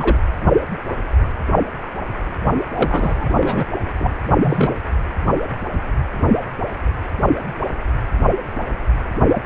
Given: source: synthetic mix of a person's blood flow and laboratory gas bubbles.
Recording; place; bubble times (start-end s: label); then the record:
Doppler ultrasound of blood flow; precordium
0.00-0.17 s: bubbles
2.75-3.27 s: bubbles
3.35-3.65 s: bubbles
3.98-4.14 s: bubbles
4.42-4.75 s: bubbles
9.36-9.42 s: bubbles
From the record:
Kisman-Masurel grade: 223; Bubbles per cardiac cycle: several, 3 to 8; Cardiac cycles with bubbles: 10 to 50%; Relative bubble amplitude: loud (0.450 to 0.775); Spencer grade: 2 (many but less than half of the cardiac periods contain bubble signals, singularly or in groups); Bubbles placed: anywhere in the cardiac cycle